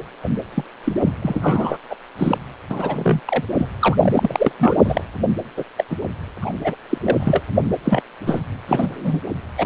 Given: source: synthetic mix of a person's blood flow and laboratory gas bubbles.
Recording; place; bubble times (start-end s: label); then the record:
Doppler ultrasound of blood flow; precordium
0.54-0.65 s: bubbles
0.84-0.92 s: bubbles
1.04-1.11 s: bubbles
1.22-1.38 s: bubbles
1.41-1.78 s: bubbles
1.90-1.96 s: bubbles
2.17-2.38 s: bubbles
2.69-3.21 s: bubbles
3.27-3.43 s: bubbles
3.58-3.69 s: bubbles
3.79-3.97 s: bubbles
4.01-4.52 s: bubbles
4.58-5.04 s: bubbles
5.56-5.64 s: bubbles
5.78-5.84 s: bubbles
5.90-5.96 s: bubbles
6.42-6.53 s: bubbles
6.64-6.75 s: bubbles
6.89-6.98 s: bubbles
7.00-7.17 s: bubbles
7.19-7.41 s: bubbles
7.84-8.03 s: bubbles
8.26-8.42 s: bubbles
8.68-9.21 s: bubbles
9.58-9.66 s: bubbles
From the record:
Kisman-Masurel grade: 243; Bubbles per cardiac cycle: several, 3 to 8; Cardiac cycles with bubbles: 100%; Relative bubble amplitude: loud (0.450 to 0.775); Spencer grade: 3 (all of the cardiac periods contain showers or single bubble signals, but not dominating or overriding the cardiac motion signals); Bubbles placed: anywhere in the cardiac cycle